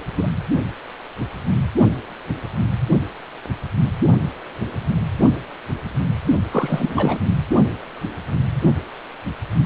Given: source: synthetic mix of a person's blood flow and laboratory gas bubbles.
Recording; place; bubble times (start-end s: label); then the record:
Doppler ultrasound of blood flow; precordium
0.15-0.29 s: bubbles
6.52-7.20 s: bubbles
From the record:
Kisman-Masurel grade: 222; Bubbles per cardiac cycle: several, 3 to 8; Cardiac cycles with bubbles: 10 to 50%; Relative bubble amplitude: moderate (0.250 to 0.450); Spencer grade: 2 (many but less than half of the cardiac periods contain bubble signals, singularly or in groups); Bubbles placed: only in the low amplitude regions of the cardiac cycle